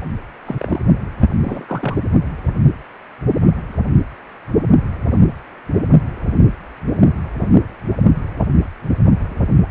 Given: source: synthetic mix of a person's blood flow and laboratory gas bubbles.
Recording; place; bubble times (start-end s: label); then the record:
Doppler ultrasound of blood flow; precordium
0.45-0.55 s: bubbles
0.58-0.81 s: bubbles
1.22-1.27 s: bubbles
1.43-1.98 s: bubbles
From the record:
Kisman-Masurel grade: 222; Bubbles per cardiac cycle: several, 3 to 8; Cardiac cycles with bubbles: 10 to 50%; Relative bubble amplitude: moderate (0.250 to 0.450); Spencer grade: 2 (many but less than half of the cardiac periods contain bubble signals, singularly or in groups); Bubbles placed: only in the low amplitude regions of the cardiac cycle